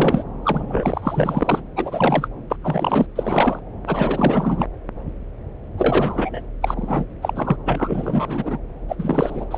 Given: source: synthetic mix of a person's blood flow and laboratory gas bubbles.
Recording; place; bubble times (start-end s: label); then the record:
Doppler ultrasound of blood flow; subclavian vein
0.00-0.24 s: bubbles
0.43-1.60 s: bubbles
1.76-2.28 s: bubbles
2.50-2.56 s: bubbles
2.62-3.06 s: bubbles
3.15-3.60 s: bubbles
3.87-4.66 s: bubbles
5.77-6.42 s: bubbles
6.62-7.06 s: bubbles
7.21-7.57 s: bubbles
7.66-8.57 s: bubbles
8.89-8.96 s: bubbles
8.98-9.46 s: bubbles
9.51-9.58 s: bubbles
From the record:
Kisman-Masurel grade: 332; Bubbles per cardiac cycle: rolling drumbeat, 9 or more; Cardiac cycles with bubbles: 50 to 99%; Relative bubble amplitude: moderate (0.250 to 0.450); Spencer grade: 3 (all of the cardiac periods contain showers or single bubble signals, but not dominating or overriding the cardiac motion signals); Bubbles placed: anywhere in the cardiac cycle